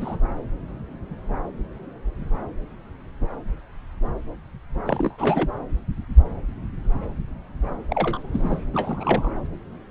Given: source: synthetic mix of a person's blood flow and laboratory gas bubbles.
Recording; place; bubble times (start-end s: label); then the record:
Doppler ultrasound of blood flow; subclavian vein
0.00-0.17 s: bubbles
4.86-5.50 s: bubbles
7.91-8.64 s: bubbles
8.73-9.30 s: bubbles
From the record:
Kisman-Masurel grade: 222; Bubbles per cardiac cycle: several, 3 to 8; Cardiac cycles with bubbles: 10 to 50%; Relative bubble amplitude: moderate (0.250 to 0.450); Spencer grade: 2 (many but less than half of the cardiac periods contain bubble signals, singularly or in groups); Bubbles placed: anywhere in the cardiac cycle